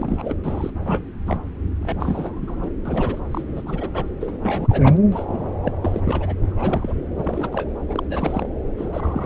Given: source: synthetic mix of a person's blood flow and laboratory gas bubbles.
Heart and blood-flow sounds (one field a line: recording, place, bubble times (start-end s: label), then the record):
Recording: Doppler ultrasound of blood flow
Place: subclavian vein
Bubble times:
0.00-0.35 s: bubbles
0.43-0.72 s: bubbles
0.84-1.03 s: bubbles
1.26-1.38 s: bubbles
1.80-2.71 s: bubbles
2.85-3.19 s: bubbles
3.31-3.43 s: bubbles
3.48-3.88 s: bubbles
3.93-4.05 s: bubbles
4.21-4.38 s: bubbles
4.42-4.97 s: bubbles
5.12-5.55 s: bubbles
5.62-5.76 s: bubbles
5.80-6.35 s: bubbles
6.43-6.94 s: bubbles
7.17-7.70 s: bubbles
7.88-8.03 s: bubbles
8.10-8.49 s: bubbles
8.78-9.25 s: bubbles
From the record:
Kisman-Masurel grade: 342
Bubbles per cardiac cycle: rolling drumbeat, 9 or more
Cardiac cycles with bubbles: 100%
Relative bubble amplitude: moderate (0.250 to 0.450)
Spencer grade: 3 (all of the cardiac periods contain showers or single bubble signals, but not dominating or overriding the cardiac motion signals)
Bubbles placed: anywhere in the cardiac cycle